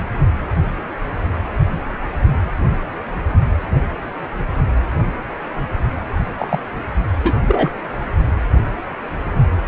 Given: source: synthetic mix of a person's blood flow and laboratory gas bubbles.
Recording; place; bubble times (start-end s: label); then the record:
Doppler ultrasound of blood flow; precordium
6.39-6.59 s: bubbles
7.24-7.35 s: bubbles
7.47-7.70 s: bubbles
From the record:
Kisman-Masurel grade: 123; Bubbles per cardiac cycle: 1 to 2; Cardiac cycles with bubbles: 10 to 50%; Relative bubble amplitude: loud (0.450 to 0.775); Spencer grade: 2 (many but less than half of the cardiac periods contain bubble signals, singularly or in groups); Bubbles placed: only in the low amplitude regions of the cardiac cycle